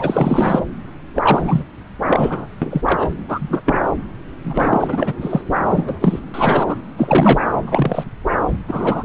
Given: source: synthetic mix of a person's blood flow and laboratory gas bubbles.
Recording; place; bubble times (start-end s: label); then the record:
Doppler ultrasound of blood flow; subclavian vein
0.00-0.59 s: bubbles
1.15-1.64 s: bubbles
2.07-2.47 s: bubbles
2.62-2.82 s: bubbles
2.86-3.09 s: bubbles
3.29-3.61 s: bubbles
3.65-3.87 s: bubbles
4.44-5.15 s: bubbles
5.21-5.42 s: bubbles
5.69-5.96 s: bubbles
6.00-6.19 s: bubbles
6.33-6.75 s: bubbles
6.97-7.40 s: bubbles
7.66-8.04 s: bubbles
8.67-9.04 s: bubbles
From the record:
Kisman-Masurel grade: 243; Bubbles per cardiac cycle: several, 3 to 8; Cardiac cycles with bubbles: 100%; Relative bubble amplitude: loud (0.450 to 0.775); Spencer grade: 3 (all of the cardiac periods contain showers or single bubble signals, but not dominating or overriding the cardiac motion signals); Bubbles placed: anywhere in the cardiac cycle